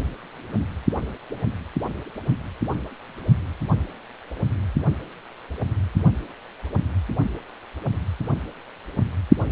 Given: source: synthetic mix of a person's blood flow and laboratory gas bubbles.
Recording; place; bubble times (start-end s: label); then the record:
Doppler ultrasound of blood flow; precordium
no bubbles
From the record:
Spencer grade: 0 (complete lack of bubble signals)